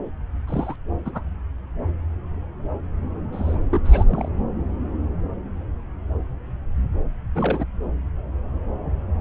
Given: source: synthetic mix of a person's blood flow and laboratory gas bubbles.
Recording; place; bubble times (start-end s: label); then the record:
Doppler ultrasound of blood flow; subclavian vein
0.47-0.76 s: bubbles
1.05-1.24 s: bubbles
3.33-3.56 s: bubbles
3.71-3.81 s: bubbles
3.85-4.29 s: bubbles
7.35-7.64 s: bubbles
From the record:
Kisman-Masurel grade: 221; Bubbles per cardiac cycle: several, 3 to 8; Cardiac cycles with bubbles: 10 to 50%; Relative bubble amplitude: barely perceptible (0.100 to 0.250); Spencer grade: 2 (many but less than half of the cardiac periods contain bubble signals, singularly or in groups); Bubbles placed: anywhere in the cardiac cycle